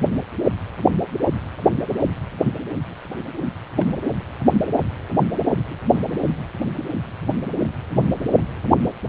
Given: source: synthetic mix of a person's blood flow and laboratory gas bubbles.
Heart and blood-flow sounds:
Doppler ultrasound of blood flow; precordium
1.27-1.33 s: bubbles
3.79-3.87 s: bubbles
5.71-5.75 s: bubbles
5.92-6.02 s: bubbles
From the record:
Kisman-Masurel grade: 121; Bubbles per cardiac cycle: 1 to 2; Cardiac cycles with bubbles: 10 to 50%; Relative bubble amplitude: barely perceptible (0.100 to 0.250); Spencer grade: 2 (many but less than half of the cardiac periods contain bubble signals, singularly or in groups); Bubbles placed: anywhere in the cardiac cycle

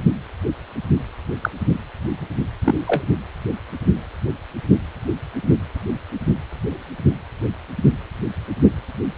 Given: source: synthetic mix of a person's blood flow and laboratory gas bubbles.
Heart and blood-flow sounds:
Doppler ultrasound of blood flow; precordium
1.41-1.50 s: bubbles
2.64-2.75 s: bubbles
2.87-3.04 s: bubbles
From the record:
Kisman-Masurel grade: 123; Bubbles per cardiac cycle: 1 to 2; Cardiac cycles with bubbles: 10 to 50%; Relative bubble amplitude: loud (0.450 to 0.775); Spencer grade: 2 (many but less than half of the cardiac periods contain bubble signals, singularly or in groups); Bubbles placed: anywhere in the cardiac cycle

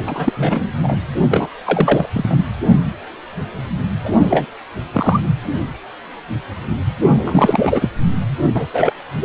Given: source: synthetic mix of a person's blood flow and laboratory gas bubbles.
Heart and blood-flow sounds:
Doppler ultrasound of blood flow; precordium
0.00-0.32 s: bubbles
0.36-0.72 s: bubbles
0.82-1.00 s: bubbles
1.30-1.46 s: bubbles
1.66-2.09 s: bubbles
2.14-2.44 s: bubbles
4.04-4.46 s: bubbles
4.94-5.20 s: bubbles
5.23-5.33 s: bubbles
7.09-7.89 s: bubbles
8.54-8.66 s: bubbles
8.73-8.93 s: bubbles
9.21-9.25 s: bubbles
From the record:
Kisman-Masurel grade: 233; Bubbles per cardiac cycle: several, 3 to 8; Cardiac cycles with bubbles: 50 to 99%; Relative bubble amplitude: loud (0.450 to 0.775); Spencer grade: 3 (all of the cardiac periods contain showers or single bubble signals, but not dominating or overriding the cardiac motion signals); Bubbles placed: anywhere in the cardiac cycle

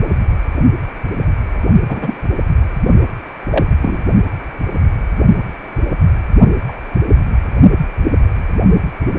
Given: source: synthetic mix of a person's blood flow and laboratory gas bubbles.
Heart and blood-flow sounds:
Doppler ultrasound of blood flow; precordium
1.89-2.17 s: bubbles
3.50-3.66 s: bubbles
3.81-4.02 s: bubbles
6.68-6.73 s: bubbles
From the record:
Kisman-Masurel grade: 123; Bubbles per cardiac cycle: 1 to 2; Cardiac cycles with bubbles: 10 to 50%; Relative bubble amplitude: loud (0.450 to 0.775); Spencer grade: 2 (many but less than half of the cardiac periods contain bubble signals, singularly or in groups); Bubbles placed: only in the low amplitude regions of the cardiac cycle

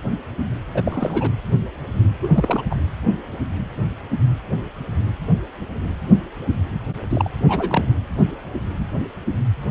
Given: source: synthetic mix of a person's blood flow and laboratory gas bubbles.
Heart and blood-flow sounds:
Doppler ultrasound of blood flow; precordium
0.74-1.31 s: bubbles
2.22-2.29 s: bubbles
2.33-2.62 s: bubbles
2.70-2.76 s: bubbles
7.10-7.30 s: bubbles
7.49-7.85 s: bubbles
From the record:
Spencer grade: 2 (many but less than half of the cardiac periods contain bubble signals, singularly or in groups); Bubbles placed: anywhere in the cardiac cycle

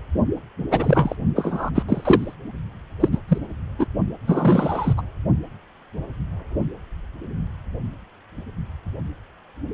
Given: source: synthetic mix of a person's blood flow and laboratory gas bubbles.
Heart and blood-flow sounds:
Doppler ultrasound of blood flow; precordium
0.71-1.15 s: bubbles
1.35-1.70 s: bubbles
1.74-1.82 s: bubbles
1.89-2.35 s: bubbles
3.00-3.08 s: bubbles
3.11-3.19 s: bubbles
3.28-3.38 s: bubbles
3.79-3.86 s: bubbles
4.25-4.94 s: bubbles
4.97-5.02 s: bubbles
From the record:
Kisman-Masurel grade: 233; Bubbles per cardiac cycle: several, 3 to 8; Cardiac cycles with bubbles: 50 to 99%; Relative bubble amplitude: loud (0.450 to 0.775); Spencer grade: 3 (all of the cardiac periods contain showers or single bubble signals, but not dominating or overriding the cardiac motion signals); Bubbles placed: only in the low amplitude regions of the cardiac cycle

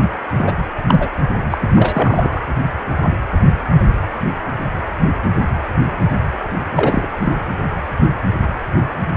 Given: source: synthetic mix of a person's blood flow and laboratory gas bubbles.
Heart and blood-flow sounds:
Doppler ultrasound of blood flow; precordium
0.30-0.53 s: bubbles
0.88-1.08 s: bubbles
1.50-1.58 s: bubbles
1.60-2.41 s: bubbles
6.75-7.06 s: bubbles
7.20-7.41 s: bubbles
From the record:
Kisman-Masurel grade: 223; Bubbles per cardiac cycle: several, 3 to 8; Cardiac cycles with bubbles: 10 to 50%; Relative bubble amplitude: loud (0.450 to 0.775); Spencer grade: 2 (many but less than half of the cardiac periods contain bubble signals, singularly or in groups); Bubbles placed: anywhere in the cardiac cycle

